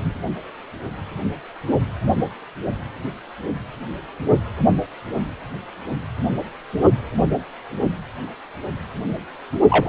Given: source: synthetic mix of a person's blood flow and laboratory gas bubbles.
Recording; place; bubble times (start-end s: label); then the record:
Doppler ultrasound of blood flow; precordium
9.70-9.89 s: bubbles
From the record:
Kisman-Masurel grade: 112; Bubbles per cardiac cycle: 1 to 2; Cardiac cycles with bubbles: 1 to 10%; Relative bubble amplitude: moderate (0.250 to 0.450); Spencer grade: 1 (occasional bubble signal discernible with the cardiac motion signal, with majority of cardiac periods free of bubbles); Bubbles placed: anywhere in the cardiac cycle